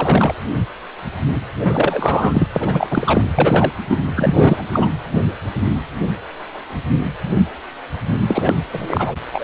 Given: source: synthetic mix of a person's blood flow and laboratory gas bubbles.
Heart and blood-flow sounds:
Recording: Doppler ultrasound of blood flow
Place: precordium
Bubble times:
0.00-0.35 s: bubbles
1.59-2.47 s: bubbles
2.55-2.87 s: bubbles
2.90-3.31 s: bubbles
3.38-3.71 s: bubbles
3.89-3.97 s: bubbles
4.16-4.64 s: bubbles
4.72-4.90 s: bubbles
8.27-8.62 s: bubbles
8.73-9.15 s: bubbles
9.32-9.44 s: bubbles
From the record:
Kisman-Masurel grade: 333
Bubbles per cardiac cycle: rolling drumbeat, 9 or more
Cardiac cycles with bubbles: 50 to 99%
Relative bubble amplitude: loud (0.450 to 0.775)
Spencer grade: 3 (all of the cardiac periods contain showers or single bubble signals, but not dominating or overriding the cardiac motion signals)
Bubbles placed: anywhere in the cardiac cycle

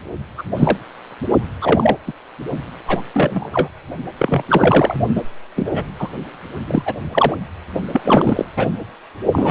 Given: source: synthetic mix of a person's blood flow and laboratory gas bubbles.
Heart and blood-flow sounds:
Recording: Doppler ultrasound of blood flow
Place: precordium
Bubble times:
0.38-0.43 s: bubbles
0.57-0.77 s: bubbles
1.61-1.96 s: bubbles
2.07-2.12 s: bubbles
2.88-3.02 s: bubbles
3.13-3.69 s: bubbles
4.18-4.43 s: bubbles
4.48-4.95 s: bubbles
5.15-5.22 s: bubbles
5.56-5.83 s: bubbles
5.99-6.09 s: bubbles
6.67-6.83 s: bubbles
6.85-6.95 s: bubbles
7.12-7.36 s: bubbles
7.93-8.45 s: bubbles
8.56-8.67 s: bubbles
9.32-9.51 s: bubbles
From the record:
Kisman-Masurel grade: 243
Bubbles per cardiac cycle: several, 3 to 8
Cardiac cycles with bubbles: 100%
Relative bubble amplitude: loud (0.450 to 0.775)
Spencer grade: 3 (all of the cardiac periods contain showers or single bubble signals, but not dominating or overriding the cardiac motion signals)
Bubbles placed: only in the low amplitude regions of the cardiac cycle

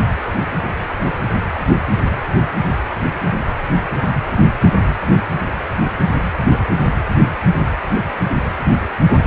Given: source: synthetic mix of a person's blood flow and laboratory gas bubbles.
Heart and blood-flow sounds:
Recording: Doppler ultrasound of blood flow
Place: precordium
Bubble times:
1.54-1.63 s: bubbles
2.50-2.71 s: bubbles
4.59-4.66 s: bubbles
6.50-6.61 s: bubbles
9.10-9.16 s: bubbles
From the record:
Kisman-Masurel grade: 121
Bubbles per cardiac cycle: 1 to 2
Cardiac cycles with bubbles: 10 to 50%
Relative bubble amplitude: barely perceptible (0.100 to 0.250)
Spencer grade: 2 (many but less than half of the cardiac periods contain bubble signals, singularly or in groups)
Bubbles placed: anywhere in the cardiac cycle

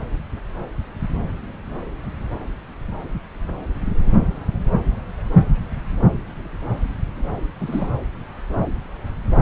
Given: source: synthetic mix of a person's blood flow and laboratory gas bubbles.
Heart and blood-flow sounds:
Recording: Doppler ultrasound of blood flow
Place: subclavian vein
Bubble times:
7.59-7.90 s: bubbles
From the record:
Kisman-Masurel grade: 211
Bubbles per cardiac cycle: several, 3 to 8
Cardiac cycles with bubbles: 1 to 10%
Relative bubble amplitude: barely perceptible (0.100 to 0.250)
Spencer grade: 1 (occasional bubble signal discernible with the cardiac motion signal, with majority of cardiac periods free of bubbles)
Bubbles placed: anywhere in the cardiac cycle

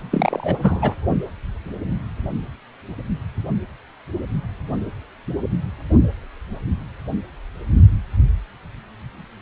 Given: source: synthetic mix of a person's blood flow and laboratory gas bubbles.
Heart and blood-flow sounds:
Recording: Doppler ultrasound of blood flow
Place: precordium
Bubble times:
0.00-0.03 s: bubbles
0.11-0.56 s: bubbles
0.61-0.95 s: bubbles
From the record:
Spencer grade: 1 (occasional bubble signal discernible with the cardiac motion signal, with majority of cardiac periods free of bubbles)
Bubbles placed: only in the low amplitude regions of the cardiac cycle

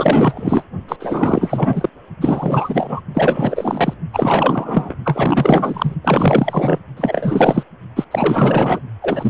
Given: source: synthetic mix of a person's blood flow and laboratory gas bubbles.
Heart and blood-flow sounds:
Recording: Doppler ultrasound of blood flow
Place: precordium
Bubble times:
0.00-0.65 s: bubbles
0.88-0.96 s: bubbles
0.99-1.90 s: bubbles
2.21-3.00 s: bubbles
3.14-3.94 s: bubbles
4.12-4.95 s: bubbles
5.04-5.94 s: bubbles
6.04-6.79 s: bubbles
6.97-7.64 s: bubbles
7.96-8.04 s: bubbles
8.11-8.80 s: bubbles
9.02-9.30 s: bubbles
From the record:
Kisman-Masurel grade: 444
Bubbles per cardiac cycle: continuous sound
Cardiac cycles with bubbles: 100%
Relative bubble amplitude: maximal (0.775 to 0.999)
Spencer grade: 4 (maximum detectable bubble signal sounding continuously throughout systole and diastole of every cardiac period, and overriding the amplitude of the normal cardiac signals)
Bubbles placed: only in the low amplitude regions of the cardiac cycle

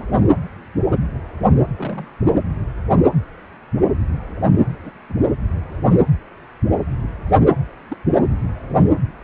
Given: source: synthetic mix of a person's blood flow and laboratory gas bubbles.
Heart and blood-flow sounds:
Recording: Doppler ultrasound of blood flow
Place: precordium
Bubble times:
1.77-2.08 s: bubbles
2.23-2.36 s: bubbles
4.82-4.91 s: bubbles
5.09-5.14 s: bubbles
7.88-7.97 s: bubbles
8.12-8.25 s: bubbles
From the record:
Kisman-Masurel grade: 121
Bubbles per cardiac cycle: 1 to 2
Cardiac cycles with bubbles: 10 to 50%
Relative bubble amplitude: barely perceptible (0.100 to 0.250)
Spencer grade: 2 (many but less than half of the cardiac periods contain bubble signals, singularly or in groups)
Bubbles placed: anywhere in the cardiac cycle

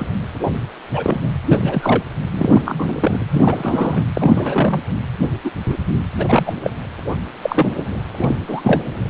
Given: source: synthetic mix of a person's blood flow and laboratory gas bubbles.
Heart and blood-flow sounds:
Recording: Doppler ultrasound of blood flow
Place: precordium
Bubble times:
0.00-0.05 s: bubbles
0.93-1.32 s: bubbles
1.49-2.03 s: bubbles
2.32-2.62 s: bubbles
2.65-3.20 s: bubbles
3.31-4.04 s: bubbles
4.13-4.82 s: bubbles
5.44-5.50 s: bubbles
5.68-5.77 s: bubbles
6.17-6.53 s: bubbles
6.62-6.71 s: bubbles
7.42-7.67 s: bubbles
8.17-8.36 s: bubbles
8.47-8.82 s: bubbles
From the record:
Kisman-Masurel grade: 233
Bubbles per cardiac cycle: several, 3 to 8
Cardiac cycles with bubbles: 50 to 99%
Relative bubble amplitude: loud (0.450 to 0.775)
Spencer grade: 3 (all of the cardiac periods contain showers or single bubble signals, but not dominating or overriding the cardiac motion signals)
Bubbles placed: anywhere in the cardiac cycle

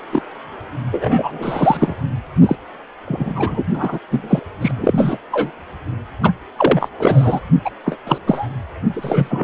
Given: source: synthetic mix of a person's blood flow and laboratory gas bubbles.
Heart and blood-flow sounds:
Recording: Doppler ultrasound of blood flow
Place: precordium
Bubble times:
0.12-0.22 s: bubbles
0.91-1.96 s: bubbles
2.42-2.56 s: bubbles
3.05-3.64 s: bubbles
3.73-3.98 s: bubbles
4.11-4.40 s: bubbles
4.61-4.72 s: bubbles
4.76-5.17 s: bubbles
5.32-5.52 s: bubbles
6.23-6.32 s: bubbles
6.57-6.89 s: bubbles
6.99-7.41 s: bubbles
7.65-7.70 s: bubbles
7.85-7.97 s: bubbles
8.06-8.18 s: bubbles
8.27-8.48 s: bubbles
8.93-9.44 s: bubbles
From the record:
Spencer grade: 3 (all of the cardiac periods contain showers or single bubble signals, but not dominating or overriding the cardiac motion signals)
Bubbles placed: anywhere in the cardiac cycle

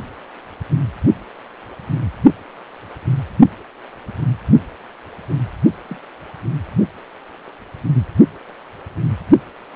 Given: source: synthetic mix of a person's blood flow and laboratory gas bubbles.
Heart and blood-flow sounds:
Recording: Doppler ultrasound of blood flow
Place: precordium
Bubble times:
5.89-5.96 s: bubbles
From the record:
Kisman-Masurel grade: 111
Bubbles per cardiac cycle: 1 to 2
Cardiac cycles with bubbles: 1 to 10%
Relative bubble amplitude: barely perceptible (0.100 to 0.250)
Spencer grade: 1 (occasional bubble signal discernible with the cardiac motion signal, with majority of cardiac periods free of bubbles)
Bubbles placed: only in the low amplitude regions of the cardiac cycle

